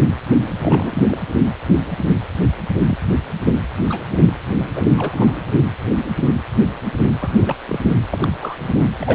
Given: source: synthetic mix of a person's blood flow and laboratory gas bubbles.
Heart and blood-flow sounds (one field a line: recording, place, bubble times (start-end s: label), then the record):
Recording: Doppler ultrasound of blood flow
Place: precordium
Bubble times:
0.60-1.02 s: bubbles
1.08-1.18 s: bubbles
2.40-2.48 s: bubbles
2.86-2.98 s: bubbles
3.89-4.06 s: bubbles
4.25-4.34 s: bubbles
4.58-4.69 s: bubbles
4.75-4.81 s: bubbles
4.98-5.38 s: bubbles
7.20-7.29 s: bubbles
7.33-7.55 s: bubbles
7.65-7.79 s: bubbles
8.11-8.31 s: bubbles
8.40-8.56 s: bubbles
8.62-8.89 s: bubbles
8.99-9.15 s: bubbles
From the record:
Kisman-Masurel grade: 232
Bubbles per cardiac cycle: several, 3 to 8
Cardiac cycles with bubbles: 50 to 99%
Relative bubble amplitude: moderate (0.250 to 0.450)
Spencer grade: 3 (all of the cardiac periods contain showers or single bubble signals, but not dominating or overriding the cardiac motion signals)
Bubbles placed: anywhere in the cardiac cycle